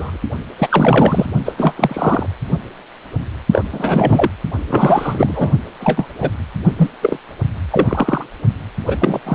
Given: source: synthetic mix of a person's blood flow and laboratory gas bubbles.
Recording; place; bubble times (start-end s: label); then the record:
Doppler ultrasound of blood flow; precordium
0.00-0.17 s: bubbles
0.58-1.26 s: bubbles
1.45-1.52 s: bubbles
1.57-2.27 s: bubbles
3.52-3.64 s: bubbles
3.71-4.29 s: bubbles
4.67-5.51 s: bubbles
5.79-6.06 s: bubbles
6.21-6.30 s: bubbles
6.76-6.89 s: bubbles
7.01-7.18 s: bubbles
7.71-8.25 s: bubbles
8.87-8.96 s: bubbles
8.99-9.20 s: bubbles
9.26-9.35 s: bubbles
From the record:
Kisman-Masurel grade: 233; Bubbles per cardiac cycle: several, 3 to 8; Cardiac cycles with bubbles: 50 to 99%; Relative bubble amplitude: loud (0.450 to 0.775); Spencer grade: 3 (all of the cardiac periods contain showers or single bubble signals, but not dominating or overriding the cardiac motion signals); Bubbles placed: only in the low amplitude regions of the cardiac cycle